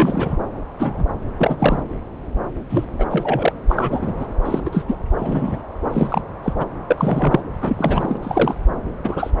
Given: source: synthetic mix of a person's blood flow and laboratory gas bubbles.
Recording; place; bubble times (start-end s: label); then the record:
Doppler ultrasound of blood flow; subclavian vein
0.00-0.36 s: bubbles
0.79-1.05 s: bubbles
1.39-1.81 s: bubbles
2.69-2.85 s: bubbles
2.98-3.04 s: bubbles
3.10-3.52 s: bubbles
3.69-4.13 s: bubbles
4.17-4.26 s: bubbles
4.45-4.60 s: bubbles
4.65-4.83 s: bubbles
4.88-4.96 s: bubbles
5.17-5.63 s: bubbles
5.92-6.21 s: bubbles
6.42-6.53 s: bubbles
6.59-6.65 s: bubbles
6.90-7.40 s: bubbles
7.61-8.17 s: bubbles
8.22-8.55 s: bubbles
9.03-9.30 s: bubbles
From the record:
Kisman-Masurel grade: 242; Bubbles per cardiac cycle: several, 3 to 8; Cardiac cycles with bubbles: 100%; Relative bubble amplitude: moderate (0.250 to 0.450); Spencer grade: 3 (all of the cardiac periods contain showers or single bubble signals, but not dominating or overriding the cardiac motion signals); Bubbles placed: anywhere in the cardiac cycle